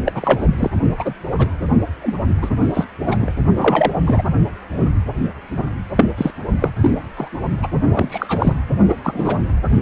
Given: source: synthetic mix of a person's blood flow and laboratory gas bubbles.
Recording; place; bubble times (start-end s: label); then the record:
Doppler ultrasound of blood flow; precordium
0.05-0.48 s: bubbles
0.55-0.70 s: bubbles
0.96-1.14 s: bubbles
1.38-1.47 s: bubbles
2.02-2.16 s: bubbles
2.42-2.50 s: bubbles
2.58-2.69 s: bubbles
2.74-2.86 s: bubbles
3.06-3.32 s: bubbles
3.55-3.92 s: bubbles
4.06-4.22 s: bubbles
5.96-6.06 s: bubbles
6.17-6.31 s: bubbles
6.60-6.70 s: bubbles
6.80-6.91 s: bubbles
7.17-7.28 s: bubbles
7.62-7.67 s: bubbles
7.93-8.53 s: bubbles
8.89-8.94 s: bubbles
9.04-9.41 s: bubbles
From the record:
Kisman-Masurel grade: 233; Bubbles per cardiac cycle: several, 3 to 8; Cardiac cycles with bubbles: 50 to 99%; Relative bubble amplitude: loud (0.450 to 0.775); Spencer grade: 3 (all of the cardiac periods contain showers or single bubble signals, but not dominating or overriding the cardiac motion signals); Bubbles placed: only in the low amplitude regions of the cardiac cycle